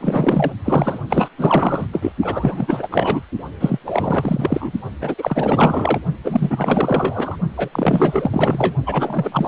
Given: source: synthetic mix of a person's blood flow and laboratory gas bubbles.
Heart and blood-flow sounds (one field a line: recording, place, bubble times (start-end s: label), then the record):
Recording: Doppler ultrasound of blood flow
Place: precordium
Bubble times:
0.00-0.52 s: bubbles
0.65-0.99 s: bubbles
1.10-1.29 s: bubbles
1.37-1.85 s: bubbles
1.92-2.12 s: bubbles
2.22-2.88 s: bubbles
2.92-3.23 s: bubbles
3.60-3.77 s: bubbles
3.85-4.72 s: bubbles
5.01-5.14 s: bubbles
5.17-6.00 s: bubbles
6.24-7.35 s: bubbles
7.57-7.68 s: bubbles
7.72-8.75 s: bubbles
8.86-9.48 s: bubbles
From the record:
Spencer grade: 4 (maximum detectable bubble signal sounding continuously throughout systole and diastole of every cardiac period, and overriding the amplitude of the normal cardiac signals)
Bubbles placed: only in the low amplitude regions of the cardiac cycle